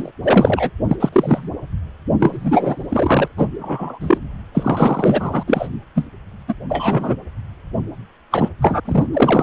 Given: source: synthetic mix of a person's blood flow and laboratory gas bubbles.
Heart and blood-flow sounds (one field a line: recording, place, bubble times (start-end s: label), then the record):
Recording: Doppler ultrasound of blood flow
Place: precordium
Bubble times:
0.00-0.11 s: bubbles
0.23-0.70 s: bubbles
0.88-0.97 s: bubbles
1.00-1.09 s: bubbles
1.12-1.49 s: bubbles
2.19-3.28 s: bubbles
3.36-3.46 s: bubbles
3.59-4.18 s: bubbles
4.54-5.43 s: bubbles
5.46-5.68 s: bubbles
5.95-6.05 s: bubbles
6.48-6.54 s: bubbles
6.69-7.17 s: bubbles
8.31-8.49 s: bubbles
8.62-8.80 s: bubbles
8.85-9.07 s: bubbles
9.13-9.43 s: bubbles
From the record:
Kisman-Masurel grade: 233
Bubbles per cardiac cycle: several, 3 to 8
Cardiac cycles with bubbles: 50 to 99%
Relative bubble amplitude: loud (0.450 to 0.775)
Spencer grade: 3 (all of the cardiac periods contain showers or single bubble signals, but not dominating or overriding the cardiac motion signals)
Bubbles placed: anywhere in the cardiac cycle